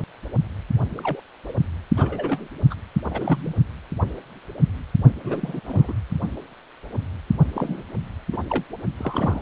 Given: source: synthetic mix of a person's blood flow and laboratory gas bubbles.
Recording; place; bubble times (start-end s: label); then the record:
Doppler ultrasound of blood flow; precordium
0.97-1.20 s: bubbles
1.47-1.52 s: bubbles
1.96-2.48 s: bubbles
2.70-2.74 s: bubbles
3.10-3.56 s: bubbles
5.24-5.60 s: bubbles
5.67-5.93 s: bubbles
7.53-7.83 s: bubbles
8.32-8.37 s: bubbles
8.50-8.65 s: bubbles
8.97-9.41 s: bubbles
From the record:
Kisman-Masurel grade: 232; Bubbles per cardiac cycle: several, 3 to 8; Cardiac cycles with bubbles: 50 to 99%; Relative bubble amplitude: moderate (0.250 to 0.450); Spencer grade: 3 (all of the cardiac periods contain showers or single bubble signals, but not dominating or overriding the cardiac motion signals); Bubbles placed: only in the low amplitude regions of the cardiac cycle